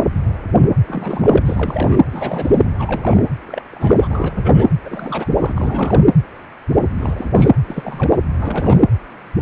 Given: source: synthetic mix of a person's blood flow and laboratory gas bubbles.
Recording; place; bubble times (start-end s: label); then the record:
Doppler ultrasound of blood flow; precordium
0.88-1.42 s: bubbles
1.45-2.01 s: bubbles
2.12-2.69 s: bubbles
2.78-3.23 s: bubbles
3.46-3.62 s: bubbles
3.71-4.67 s: bubbles
4.84-5.52 s: bubbles
5.55-6.04 s: bubbles
6.98-7.49 s: bubbles
7.67-8.22 s: bubbles
8.37-8.85 s: bubbles
From the record:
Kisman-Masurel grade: 332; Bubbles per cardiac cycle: rolling drumbeat, 9 or more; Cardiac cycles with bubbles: 50 to 99%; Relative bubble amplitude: moderate (0.250 to 0.450); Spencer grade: 3 (all of the cardiac periods contain showers or single bubble signals, but not dominating or overriding the cardiac motion signals); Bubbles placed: anywhere in the cardiac cycle